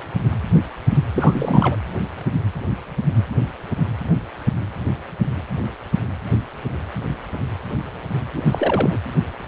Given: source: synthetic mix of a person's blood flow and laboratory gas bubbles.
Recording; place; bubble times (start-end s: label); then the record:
Doppler ultrasound of blood flow; precordium
1.15-1.76 s: bubbles
8.35-8.98 s: bubbles
From the record:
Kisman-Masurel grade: 222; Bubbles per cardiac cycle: several, 3 to 8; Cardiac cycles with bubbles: 10 to 50%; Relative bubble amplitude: moderate (0.250 to 0.450); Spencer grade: 2 (many but less than half of the cardiac periods contain bubble signals, singularly or in groups); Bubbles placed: anywhere in the cardiac cycle